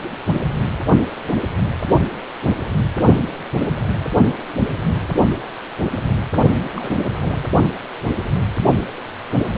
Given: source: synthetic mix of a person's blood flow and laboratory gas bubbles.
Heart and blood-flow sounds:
Doppler ultrasound of blood flow; precordium
6.76-7.11 s: bubbles
7.22-7.39 s: bubbles
From the record:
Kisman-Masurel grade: 211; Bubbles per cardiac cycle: several, 3 to 8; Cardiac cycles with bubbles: 1 to 10%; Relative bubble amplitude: barely perceptible (0.100 to 0.250); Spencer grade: 1 (occasional bubble signal discernible with the cardiac motion signal, with majority of cardiac periods free of bubbles); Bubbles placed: only in the low amplitude regions of the cardiac cycle

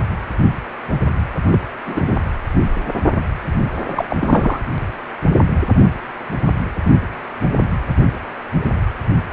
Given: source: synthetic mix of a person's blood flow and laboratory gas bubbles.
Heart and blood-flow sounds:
Doppler ultrasound of blood flow; precordium
1.50-1.59 s: bubbles
1.86-2.22 s: bubbles
3.86-4.05 s: bubbles
4.09-4.16 s: bubbles
4.21-4.60 s: bubbles
From the record:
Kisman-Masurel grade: 222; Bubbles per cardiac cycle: several, 3 to 8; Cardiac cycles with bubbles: 10 to 50%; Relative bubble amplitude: moderate (0.250 to 0.450); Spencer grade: 2 (many but less than half of the cardiac periods contain bubble signals, singularly or in groups); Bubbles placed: anywhere in the cardiac cycle

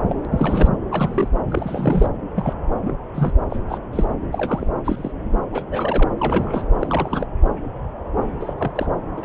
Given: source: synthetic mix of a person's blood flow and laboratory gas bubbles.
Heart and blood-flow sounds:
Doppler ultrasound of blood flow; subclavian vein
0.09-0.21 s: bubbles
0.25-0.28 s: bubbles
0.32-0.68 s: bubbles
0.91-1.28 s: bubbles
1.48-2.08 s: bubbles
2.35-2.54 s: bubbles
2.82-2.97 s: bubbles
3.14-3.32 s: bubbles
3.50-3.59 s: bubbles
3.69-3.78 s: bubbles
3.92-4.05 s: bubbles
4.32-4.67 s: bubbles
4.84-5.12 s: bubbles
5.52-6.11 s: bubbles
6.18-6.63 s: bubbles
6.79-7.26 s: bubbles
8.40-8.54 s: bubbles
8.58-8.71 s: bubbles
8.75-8.88 s: bubbles
9.17-9.25 s: bubbles
From the record:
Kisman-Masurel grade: 232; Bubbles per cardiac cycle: several, 3 to 8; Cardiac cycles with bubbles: 50 to 99%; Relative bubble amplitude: moderate (0.250 to 0.450); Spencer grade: 3 (all of the cardiac periods contain showers or single bubble signals, but not dominating or overriding the cardiac motion signals); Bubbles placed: anywhere in the cardiac cycle

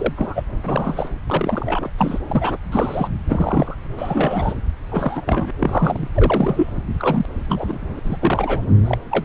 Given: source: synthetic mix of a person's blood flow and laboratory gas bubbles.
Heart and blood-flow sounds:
Doppler ultrasound of blood flow; subclavian vein
0.00-0.13 s: bubbles
0.17-0.43 s: bubbles
0.65-1.08 s: bubbles
1.27-1.90 s: bubbles
1.98-2.19 s: bubbles
2.29-2.58 s: bubbles
2.71-3.10 s: bubbles
3.28-3.77 s: bubbles
3.97-4.54 s: bubbles
4.89-5.22 s: bubbles
5.26-5.51 s: bubbles
5.59-6.08 s: bubbles
6.14-6.71 s: bubbles
6.99-7.25 s: bubbles
7.48-8.01 s: bubbles
8.04-8.17 s: bubbles
8.20-8.62 s: bubbles
8.85-8.96 s: bubbles
9.11-9.25 s: bubbles
From the record:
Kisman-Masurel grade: 242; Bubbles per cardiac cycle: several, 3 to 8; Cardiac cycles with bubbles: 100%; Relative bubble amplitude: moderate (0.250 to 0.450); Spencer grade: 3 (all of the cardiac periods contain showers or single bubble signals, but not dominating or overriding the cardiac motion signals); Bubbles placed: anywhere in the cardiac cycle

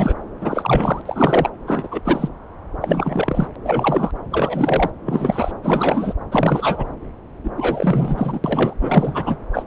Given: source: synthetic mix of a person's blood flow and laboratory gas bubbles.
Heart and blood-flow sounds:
Doppler ultrasound of blood flow; subclavian vein
0.00-0.14 s: bubbles
0.41-1.01 s: bubbles
1.05-1.50 s: bubbles
1.67-1.89 s: bubbles
1.91-2.01 s: bubbles
2.05-2.29 s: bubbles
2.81-3.48 s: bubbles
3.64-4.11 s: bubbles
4.31-4.90 s: bubbles
5.05-5.51 s: bubbles
5.63-6.13 s: bubbles
6.31-6.89 s: bubbles
7.43-7.50 s: bubbles
7.56-8.40 s: bubbles
8.44-8.73 s: bubbles
8.80-9.37 s: bubbles
9.53-9.63 s: bubbles
From the record:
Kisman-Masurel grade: 343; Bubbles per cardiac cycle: rolling drumbeat, 9 or more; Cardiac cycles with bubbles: 100%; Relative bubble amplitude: loud (0.450 to 0.775); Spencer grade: 3 (all of the cardiac periods contain showers or single bubble signals, but not dominating or overriding the cardiac motion signals); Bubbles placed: anywhere in the cardiac cycle

